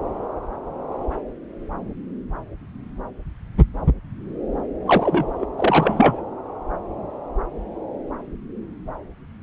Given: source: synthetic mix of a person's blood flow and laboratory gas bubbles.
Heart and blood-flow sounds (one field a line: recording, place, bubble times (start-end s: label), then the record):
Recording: Doppler ultrasound of blood flow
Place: subclavian vein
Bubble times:
4.86-5.46 s: bubbles
5.58-6.21 s: bubbles
From the record:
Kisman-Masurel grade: 213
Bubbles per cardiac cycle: several, 3 to 8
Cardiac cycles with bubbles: 1 to 10%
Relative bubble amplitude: loud (0.450 to 0.775)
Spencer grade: 1 (occasional bubble signal discernible with the cardiac motion signal, with majority of cardiac periods free of bubbles)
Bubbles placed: anywhere in the cardiac cycle